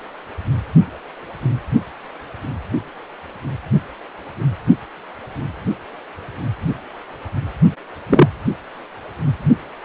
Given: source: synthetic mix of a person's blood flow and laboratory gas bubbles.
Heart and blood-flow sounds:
Doppler ultrasound of blood flow; precordium
8.09-8.28 s: bubbles
From the record:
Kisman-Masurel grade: 113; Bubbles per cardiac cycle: 1 to 2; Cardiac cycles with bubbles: 1 to 10%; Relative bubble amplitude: loud (0.450 to 0.775); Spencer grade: 1 (occasional bubble signal discernible with the cardiac motion signal, with majority of cardiac periods free of bubbles); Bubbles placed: anywhere in the cardiac cycle

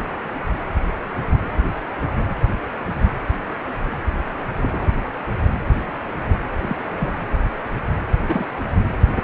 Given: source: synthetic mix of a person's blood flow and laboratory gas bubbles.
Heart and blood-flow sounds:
Doppler ultrasound of blood flow; precordium
4.58-4.91 s: bubbles
5.88-5.93 s: bubbles
6.61-6.76 s: bubbles
6.96-7.12 s: bubbles
8.28-8.47 s: bubbles
From the record:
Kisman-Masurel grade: 122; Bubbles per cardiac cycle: 1 to 2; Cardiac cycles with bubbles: 10 to 50%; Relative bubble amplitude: moderate (0.250 to 0.450); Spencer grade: 2 (many but less than half of the cardiac periods contain bubble signals, singularly or in groups); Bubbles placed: anywhere in the cardiac cycle

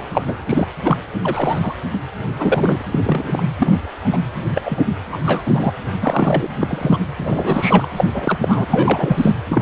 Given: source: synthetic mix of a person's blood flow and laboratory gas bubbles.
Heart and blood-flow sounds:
Doppler ultrasound of blood flow; precordium
0.00-0.03 s: bubbles
0.11-0.24 s: bubbles
0.27-0.36 s: bubbles
0.46-0.68 s: bubbles
0.83-0.97 s: bubbles
1.23-1.59 s: bubbles
1.62-1.74 s: bubbles
2.38-2.81 s: bubbles
2.90-2.99 s: bubbles
3.04-3.41 s: bubbles
3.58-3.75 s: bubbles
4.04-4.17 s: bubbles
4.54-4.62 s: bubbles
4.66-4.84 s: bubbles
5.12-5.17 s: bubbles
5.24-5.73 s: bubbles
6.01-6.47 s: bubbles
6.59-6.99 s: bubbles
7.17-7.86 s: bubbles
7.96-8.04 s: bubbles
8.13-8.66 s: bubbles
8.70-9.32 s: bubbles
9.49-9.62 s: bubbles
From the record:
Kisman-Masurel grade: 243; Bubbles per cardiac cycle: several, 3 to 8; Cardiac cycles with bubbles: 100%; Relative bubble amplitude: loud (0.450 to 0.775); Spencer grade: 3 (all of the cardiac periods contain showers or single bubble signals, but not dominating or overriding the cardiac motion signals); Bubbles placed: anywhere in the cardiac cycle

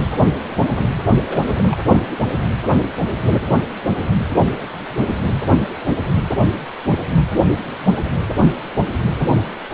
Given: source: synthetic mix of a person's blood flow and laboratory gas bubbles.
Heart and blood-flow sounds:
Doppler ultrasound of blood flow; precordium
1.26-1.88 s: bubbles
1.93-2.00 s: bubbles
From the record:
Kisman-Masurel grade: 211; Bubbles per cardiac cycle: several, 3 to 8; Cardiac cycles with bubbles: 1 to 10%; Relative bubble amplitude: barely perceptible (0.100 to 0.250); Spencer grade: 1 (occasional bubble signal discernible with the cardiac motion signal, with majority of cardiac periods free of bubbles); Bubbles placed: only in the low amplitude regions of the cardiac cycle

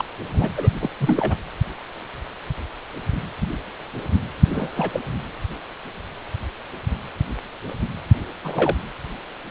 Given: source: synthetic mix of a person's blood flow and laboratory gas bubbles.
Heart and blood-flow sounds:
Doppler ultrasound of blood flow; precordium
0.00-0.05 s: bubbles
0.34-0.50 s: bubbles
0.56-0.69 s: bubbles
0.82-0.90 s: bubbles
1.00-1.36 s: bubbles
4.50-5.00 s: bubbles
8.44-8.76 s: bubbles
From the record:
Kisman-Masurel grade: 222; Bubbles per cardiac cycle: several, 3 to 8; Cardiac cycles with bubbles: 10 to 50%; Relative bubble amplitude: moderate (0.250 to 0.450); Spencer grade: 2 (many but less than half of the cardiac periods contain bubble signals, singularly or in groups); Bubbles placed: anywhere in the cardiac cycle

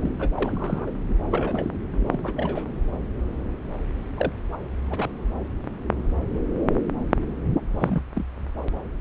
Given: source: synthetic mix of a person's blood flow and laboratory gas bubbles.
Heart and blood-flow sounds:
Doppler ultrasound of blood flow; subclavian vein
0.01-0.08 s: bubbles
0.19-0.31 s: bubbles
0.35-0.92 s: bubbles
1.07-1.16 s: bubbles
1.30-1.71 s: bubbles
1.92-2.33 s: bubbles
2.36-2.66 s: bubbles
4.17-4.32 s: bubbles
4.52-4.57 s: bubbles
4.88-5.11 s: bubbles
7.78-8.02 s: bubbles
8.14-8.27 s: bubbles
From the record:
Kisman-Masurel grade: 232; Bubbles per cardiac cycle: several, 3 to 8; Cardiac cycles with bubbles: 50 to 99%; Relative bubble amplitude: moderate (0.250 to 0.450); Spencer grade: 3 (all of the cardiac periods contain showers or single bubble signals, but not dominating or overriding the cardiac motion signals); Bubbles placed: anywhere in the cardiac cycle

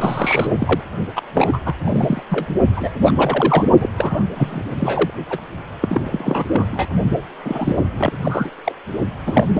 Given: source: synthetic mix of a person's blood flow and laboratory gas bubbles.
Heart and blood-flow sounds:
Doppler ultrasound of blood flow; precordium
0.00-0.81 s: bubbles
1.15-1.21 s: bubbles
1.33-1.60 s: bubbles
1.65-1.75 s: bubbles
1.84-2.23 s: bubbles
2.29-2.46 s: bubbles
2.76-2.90 s: bubbles
3.01-3.65 s: bubbles
3.79-3.89 s: bubbles
3.97-4.24 s: bubbles
4.35-4.63 s: bubbles
4.79-5.10 s: bubbles
5.29-5.41 s: bubbles
5.81-6.67 s: bubbles
6.71-6.87 s: bubbles
7.44-7.78 s: bubbles
7.97-8.13 s: bubbles
8.23-8.50 s: bubbles
8.64-8.73 s: bubbles
9.26-9.47 s: bubbles
9.54-9.60 s: bubbles
From the record:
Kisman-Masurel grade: 342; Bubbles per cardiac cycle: rolling drumbeat, 9 or more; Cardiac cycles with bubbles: 100%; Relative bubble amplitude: moderate (0.250 to 0.450); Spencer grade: 3 (all of the cardiac periods contain showers or single bubble signals, but not dominating or overriding the cardiac motion signals); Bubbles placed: only in the low amplitude regions of the cardiac cycle

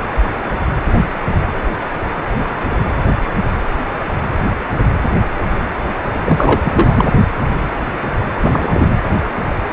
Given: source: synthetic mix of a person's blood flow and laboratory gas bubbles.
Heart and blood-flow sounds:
Doppler ultrasound of blood flow; precordium
6.25-6.59 s: bubbles
6.64-7.11 s: bubbles
8.42-8.92 s: bubbles
From the record:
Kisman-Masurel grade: 223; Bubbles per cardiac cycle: several, 3 to 8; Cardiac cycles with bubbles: 10 to 50%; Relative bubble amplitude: loud (0.450 to 0.775); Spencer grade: 2 (many but less than half of the cardiac periods contain bubble signals, singularly or in groups); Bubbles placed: anywhere in the cardiac cycle

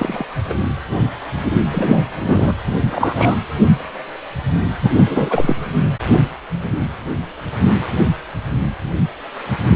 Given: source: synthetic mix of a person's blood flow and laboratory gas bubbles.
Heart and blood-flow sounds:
Doppler ultrasound of blood flow; precordium
0.00-0.25 s: bubbles
0.49-0.54 s: bubbles
1.71-2.04 s: bubbles
2.20-2.53 s: bubbles
2.66-2.75 s: bubbles
2.92-3.37 s: bubbles
4.82-4.90 s: bubbles
4.94-5.56 s: bubbles
From the record:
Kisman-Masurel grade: 233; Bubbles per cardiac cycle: several, 3 to 8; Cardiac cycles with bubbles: 50 to 99%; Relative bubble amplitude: loud (0.450 to 0.775); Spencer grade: 3 (all of the cardiac periods contain showers or single bubble signals, but not dominating or overriding the cardiac motion signals); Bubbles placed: anywhere in the cardiac cycle

